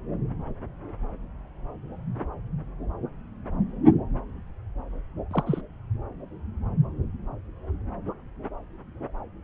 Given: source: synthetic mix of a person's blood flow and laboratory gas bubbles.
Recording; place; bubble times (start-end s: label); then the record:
Doppler ultrasound of blood flow; subclavian vein
5.31-5.44 s: bubbles
5.46-5.62 s: bubbles
From the record:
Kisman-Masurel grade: 111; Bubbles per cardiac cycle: 1 to 2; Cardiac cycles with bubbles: 1 to 10%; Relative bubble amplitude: barely perceptible (0.100 to 0.250); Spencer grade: 1 (occasional bubble signal discernible with the cardiac motion signal, with majority of cardiac periods free of bubbles); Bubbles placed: anywhere in the cardiac cycle